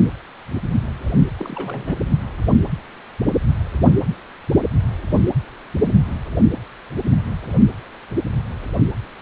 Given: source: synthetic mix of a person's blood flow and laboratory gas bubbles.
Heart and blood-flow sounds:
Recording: Doppler ultrasound of blood flow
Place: precordium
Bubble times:
1.38-2.10 s: bubbles
From the record:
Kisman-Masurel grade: 211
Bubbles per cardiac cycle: several, 3 to 8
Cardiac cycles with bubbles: 1 to 10%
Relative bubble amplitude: barely perceptible (0.100 to 0.250)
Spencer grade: 1 (occasional bubble signal discernible with the cardiac motion signal, with majority of cardiac periods free of bubbles)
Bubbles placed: only in the low amplitude regions of the cardiac cycle

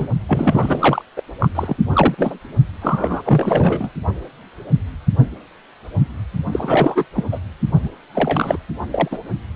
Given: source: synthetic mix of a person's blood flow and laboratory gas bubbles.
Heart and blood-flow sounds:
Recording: Doppler ultrasound of blood flow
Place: precordium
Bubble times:
0.00-0.08 s: bubbles
0.28-1.02 s: bubbles
1.17-1.22 s: bubbles
1.40-1.49 s: bubbles
1.54-1.76 s: bubbles
1.93-2.14 s: bubbles
2.17-2.35 s: bubbles
2.82-3.90 s: bubbles
6.52-7.05 s: bubbles
7.14-7.25 s: bubbles
7.32-7.39 s: bubbles
7.83-7.89 s: bubbles
8.14-8.57 s: bubbles
8.90-9.09 s: bubbles
9.11-9.18 s: bubbles
From the record:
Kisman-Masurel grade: 333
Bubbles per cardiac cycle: rolling drumbeat, 9 or more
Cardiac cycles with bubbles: 50 to 99%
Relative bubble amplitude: loud (0.450 to 0.775)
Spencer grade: 3 (all of the cardiac periods contain showers or single bubble signals, but not dominating or overriding the cardiac motion signals)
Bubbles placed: only in the low amplitude regions of the cardiac cycle

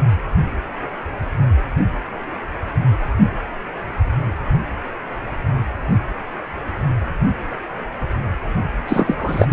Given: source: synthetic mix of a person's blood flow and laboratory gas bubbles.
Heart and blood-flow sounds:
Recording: Doppler ultrasound of blood flow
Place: precordium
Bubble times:
8.88-9.53 s: bubbles
From the record:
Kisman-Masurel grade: 213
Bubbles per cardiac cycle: several, 3 to 8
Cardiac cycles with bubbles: 1 to 10%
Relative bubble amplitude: loud (0.450 to 0.775)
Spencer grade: 1 (occasional bubble signal discernible with the cardiac motion signal, with majority of cardiac periods free of bubbles)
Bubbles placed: only in the low amplitude regions of the cardiac cycle

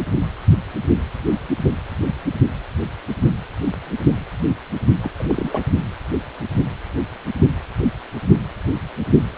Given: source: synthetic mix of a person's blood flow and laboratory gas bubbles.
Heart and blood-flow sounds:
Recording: Doppler ultrasound of blood flow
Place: precordium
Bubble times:
5.02-5.10 s: bubbles
5.19-5.62 s: bubbles
From the record:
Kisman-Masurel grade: 212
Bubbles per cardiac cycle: several, 3 to 8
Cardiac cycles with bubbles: 1 to 10%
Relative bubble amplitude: moderate (0.250 to 0.450)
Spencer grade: 1 (occasional bubble signal discernible with the cardiac motion signal, with majority of cardiac periods free of bubbles)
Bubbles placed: only in the low amplitude regions of the cardiac cycle

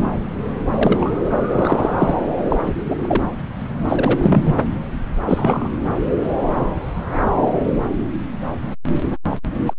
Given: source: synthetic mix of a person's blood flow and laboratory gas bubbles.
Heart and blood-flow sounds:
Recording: Doppler ultrasound of blood flow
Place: subclavian vein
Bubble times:
0.70-1.12 s: bubbles
1.52-2.19 s: bubbles
2.49-2.74 s: bubbles
2.76-2.81 s: bubbles
2.85-2.96 s: bubbles
3.02-3.21 s: bubbles
3.89-4.55 s: bubbles
5.26-5.68 s: bubbles
9.30-9.37 s: bubbles
9.66-9.74 s: bubbles
From the record:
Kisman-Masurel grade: 233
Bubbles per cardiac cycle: several, 3 to 8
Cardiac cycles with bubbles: 50 to 99%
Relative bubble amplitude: loud (0.450 to 0.775)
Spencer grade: 3 (all of the cardiac periods contain showers or single bubble signals, but not dominating or overriding the cardiac motion signals)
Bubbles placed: anywhere in the cardiac cycle

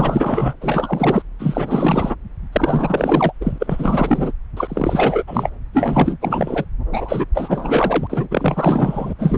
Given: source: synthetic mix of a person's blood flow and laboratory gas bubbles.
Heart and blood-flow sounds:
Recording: Doppler ultrasound of blood flow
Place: subclavian vein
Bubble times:
0.00-0.53 s: bubbles
0.60-1.23 s: bubbles
1.39-2.15 s: bubbles
2.52-3.33 s: bubbles
3.41-4.31 s: bubbles
4.56-5.23 s: bubbles
5.27-5.50 s: bubbles
5.73-6.17 s: bubbles
6.21-6.65 s: bubbles
6.92-7.25 s: bubbles
7.34-8.28 s: bubbles
8.30-9.13 s: bubbles
9.18-9.38 s: bubbles
From the record:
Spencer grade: 4 (maximum detectable bubble signal sounding continuously throughout systole and diastole of every cardiac period, and overriding the amplitude of the normal cardiac signals)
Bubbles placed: anywhere in the cardiac cycle

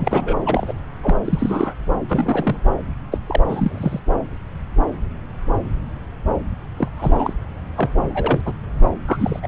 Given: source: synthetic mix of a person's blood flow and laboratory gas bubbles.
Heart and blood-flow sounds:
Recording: Doppler ultrasound of blood flow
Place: subclavian vein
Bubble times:
0.00-0.39 s: bubbles
0.45-0.74 s: bubbles
1.01-1.16 s: bubbles
1.25-1.73 s: bubbles
2.08-2.60 s: bubbles
3.11-3.17 s: bubbles
3.27-3.40 s: bubbles
3.48-4.00 s: bubbles
6.76-6.88 s: bubbles
6.96-7.33 s: bubbles
7.76-7.89 s: bubbles
8.07-8.40 s: bubbles
8.45-8.54 s: bubbles
9.07-9.39 s: bubbles
9.43-9.47 s: bubbles
From the record:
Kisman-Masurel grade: 232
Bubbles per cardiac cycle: several, 3 to 8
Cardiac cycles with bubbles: 50 to 99%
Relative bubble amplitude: moderate (0.250 to 0.450)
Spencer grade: 3 (all of the cardiac periods contain showers or single bubble signals, but not dominating or overriding the cardiac motion signals)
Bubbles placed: anywhere in the cardiac cycle

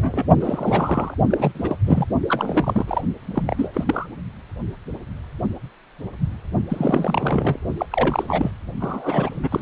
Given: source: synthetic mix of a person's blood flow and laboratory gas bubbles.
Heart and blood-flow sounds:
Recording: Doppler ultrasound of blood flow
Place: precordium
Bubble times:
0.00-0.27 s: bubbles
0.40-1.14 s: bubbles
1.30-1.76 s: bubbles
1.86-2.05 s: bubbles
2.28-3.01 s: bubbles
3.21-3.71 s: bubbles
3.74-4.07 s: bubbles
6.69-7.60 s: bubbles
7.77-7.86 s: bubbles
7.91-8.52 s: bubbles
8.80-9.48 s: bubbles
9.51-9.62 s: bubbles
From the record:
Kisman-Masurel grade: 332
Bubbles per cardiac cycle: rolling drumbeat, 9 or more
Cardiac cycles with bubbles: 50 to 99%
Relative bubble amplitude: moderate (0.250 to 0.450)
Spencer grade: 3 (all of the cardiac periods contain showers or single bubble signals, but not dominating or overriding the cardiac motion signals)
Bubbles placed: only in the low amplitude regions of the cardiac cycle

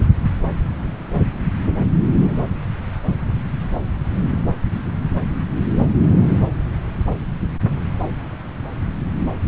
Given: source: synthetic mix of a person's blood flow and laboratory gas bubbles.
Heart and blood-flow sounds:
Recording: Doppler ultrasound of blood flow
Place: subclavian vein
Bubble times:
no bubbles
From the record:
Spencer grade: 0 (complete lack of bubble signals)

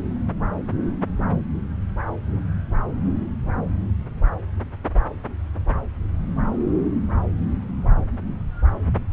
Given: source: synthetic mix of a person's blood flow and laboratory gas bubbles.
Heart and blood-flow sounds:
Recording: Doppler ultrasound of blood flow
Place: subclavian vein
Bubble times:
no bubbles
From the record:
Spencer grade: 0 (complete lack of bubble signals)

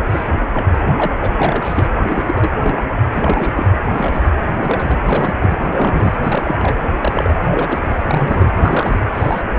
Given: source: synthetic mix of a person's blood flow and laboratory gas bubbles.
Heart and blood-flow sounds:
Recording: Doppler ultrasound of blood flow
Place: precordium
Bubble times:
0.10-0.24 s: bubbles
0.53-0.65 s: bubbles
0.96-1.12 s: bubbles
1.20-1.31 s: bubbles
1.36-1.88 s: bubbles
2.08-2.50 s: bubbles
2.62-2.82 s: bubbles
2.88-2.93 s: bubbles
3.12-3.53 s: bubbles
3.56-3.66 s: bubbles
3.87-4.28 s: bubbles
4.38-4.98 s: bubbles
5.05-5.34 s: bubbles
5.39-5.56 s: bubbles
5.73-6.18 s: bubbles
6.24-6.75 s: bubbles
6.99-7.29 s: bubbles
7.44-7.48 s: bubbles
7.50-7.79 s: bubbles
8.06-8.50 s: bubbles
8.54-9.00 s: bubbles
9.15-9.41 s: bubbles
9.56-9.59 s: bubbles
From the record:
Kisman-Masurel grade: 242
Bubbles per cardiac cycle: several, 3 to 8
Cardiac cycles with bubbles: 100%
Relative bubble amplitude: moderate (0.250 to 0.450)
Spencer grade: 3 (all of the cardiac periods contain showers or single bubble signals, but not dominating or overriding the cardiac motion signals)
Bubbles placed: anywhere in the cardiac cycle

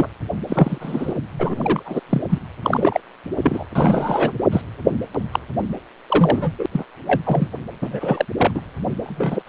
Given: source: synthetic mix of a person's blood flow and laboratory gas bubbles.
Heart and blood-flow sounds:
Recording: Doppler ultrasound of blood flow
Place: precordium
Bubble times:
0.00-0.09 s: bubbles
0.47-1.13 s: bubbles
1.39-2.00 s: bubbles
2.09-2.21 s: bubbles
2.29-2.38 s: bubbles
2.62-3.00 s: bubbles
3.42-3.64 s: bubbles
3.75-4.33 s: bubbles
4.51-4.61 s: bubbles
5.31-5.39 s: bubbles
6.08-6.51 s: bubbles
6.58-6.66 s: bubbles
6.71-6.84 s: bubbles
7.06-7.21 s: bubbles
7.23-7.48 s: bubbles
7.81-8.25 s: bubbles
8.38-8.51 s: bubbles
8.54-8.62 s: bubbles
9.04-9.42 s: bubbles
9.46-9.49 s: bubbles
From the record:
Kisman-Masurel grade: 243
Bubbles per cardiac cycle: several, 3 to 8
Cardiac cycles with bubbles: 100%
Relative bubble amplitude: loud (0.450 to 0.775)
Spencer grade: 3 (all of the cardiac periods contain showers or single bubble signals, but not dominating or overriding the cardiac motion signals)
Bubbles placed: anywhere in the cardiac cycle

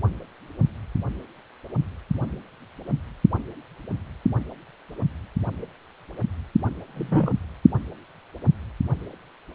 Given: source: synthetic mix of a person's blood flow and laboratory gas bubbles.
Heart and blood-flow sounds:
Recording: Doppler ultrasound of blood flow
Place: precordium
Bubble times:
6.95-7.37 s: bubbles
From the record:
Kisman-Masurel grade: 113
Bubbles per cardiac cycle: 1 to 2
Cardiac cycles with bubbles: 1 to 10%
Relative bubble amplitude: loud (0.450 to 0.775)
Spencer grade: 1 (occasional bubble signal discernible with the cardiac motion signal, with majority of cardiac periods free of bubbles)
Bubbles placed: anywhere in the cardiac cycle

